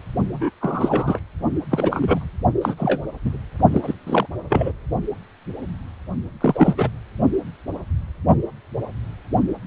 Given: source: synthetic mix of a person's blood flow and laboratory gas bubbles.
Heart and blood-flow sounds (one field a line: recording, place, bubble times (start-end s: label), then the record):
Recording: Doppler ultrasound of blood flow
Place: precordium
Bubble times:
0.33-0.51 s: bubbles
0.60-1.21 s: bubbles
1.71-2.29 s: bubbles
2.62-3.02 s: bubbles
3.24-3.38 s: bubbles
3.72-3.94 s: bubbles
4.05-4.26 s: bubbles
4.49-4.72 s: bubbles
6.40-6.91 s: bubbles
From the record:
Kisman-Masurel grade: 223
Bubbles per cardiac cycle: several, 3 to 8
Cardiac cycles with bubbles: 10 to 50%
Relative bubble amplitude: loud (0.450 to 0.775)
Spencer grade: 2 (many but less than half of the cardiac periods contain bubble signals, singularly or in groups)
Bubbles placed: only in the low amplitude regions of the cardiac cycle